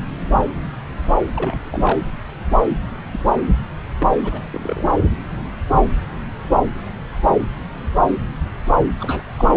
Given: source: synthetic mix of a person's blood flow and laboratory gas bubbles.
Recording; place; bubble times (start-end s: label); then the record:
Doppler ultrasound of blood flow; subclavian vein
1.36-2.00 s: bubbles
3.11-3.20 s: bubbles
3.27-3.33 s: bubbles
3.98-4.12 s: bubbles
4.23-4.47 s: bubbles
4.52-4.84 s: bubbles
8.99-9.22 s: bubbles
9.37-9.47 s: bubbles
From the record:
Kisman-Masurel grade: 221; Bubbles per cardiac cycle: several, 3 to 8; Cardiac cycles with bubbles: 10 to 50%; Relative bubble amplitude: barely perceptible (0.100 to 0.250); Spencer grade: 2 (many but less than half of the cardiac periods contain bubble signals, singularly or in groups); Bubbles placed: anywhere in the cardiac cycle